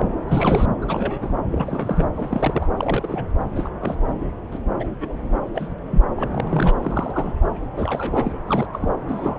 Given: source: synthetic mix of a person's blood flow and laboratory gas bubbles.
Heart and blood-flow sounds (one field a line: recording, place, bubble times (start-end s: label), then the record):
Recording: Doppler ultrasound of blood flow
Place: subclavian vein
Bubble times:
0.00-0.05 s: bubbles
0.28-0.66 s: bubbles
0.81-1.34 s: bubbles
1.52-2.09 s: bubbles
2.15-2.65 s: bubbles
2.77-3.27 s: bubbles
3.55-3.68 s: bubbles
3.81-3.95 s: bubbles
4.51-4.58 s: bubbles
4.79-4.88 s: bubbles
5.00-5.19 s: bubbles
5.54-5.67 s: bubbles
5.91-6.01 s: bubbles
6.17-6.27 s: bubbles
6.31-6.75 s: bubbles
6.81-7.33 s: bubbles
7.76-8.33 s: bubbles
8.48-8.66 s: bubbles
8.73-8.89 s: bubbles
9.08-9.39 s: bubbles
From the record:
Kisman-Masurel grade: 232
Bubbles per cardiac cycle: several, 3 to 8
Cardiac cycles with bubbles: 50 to 99%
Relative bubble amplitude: moderate (0.250 to 0.450)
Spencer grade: 3 (all of the cardiac periods contain showers or single bubble signals, but not dominating or overriding the cardiac motion signals)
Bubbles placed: anywhere in the cardiac cycle